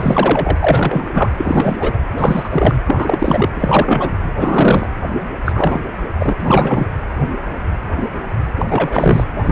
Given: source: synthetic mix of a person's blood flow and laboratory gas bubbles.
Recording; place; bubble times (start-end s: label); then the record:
Doppler ultrasound of blood flow; precordium
0.00-1.08 s: bubbles
1.15-1.31 s: bubbles
1.37-1.77 s: bubbles
1.79-1.98 s: bubbles
2.18-2.49 s: bubbles
2.52-2.76 s: bubbles
2.85-3.49 s: bubbles
3.56-4.16 s: bubbles
4.38-4.89 s: bubbles
5.45-5.80 s: bubbles
6.20-6.33 s: bubbles
6.38-6.86 s: bubbles
8.57-8.65 s: bubbles
8.68-9.24 s: bubbles
9.42-9.52 s: bubbles
From the record:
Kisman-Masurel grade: 333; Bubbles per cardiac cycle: rolling drumbeat, 9 or more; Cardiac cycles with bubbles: 50 to 99%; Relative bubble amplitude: loud (0.450 to 0.775); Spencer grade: 3 (all of the cardiac periods contain showers or single bubble signals, but not dominating or overriding the cardiac motion signals); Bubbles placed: anywhere in the cardiac cycle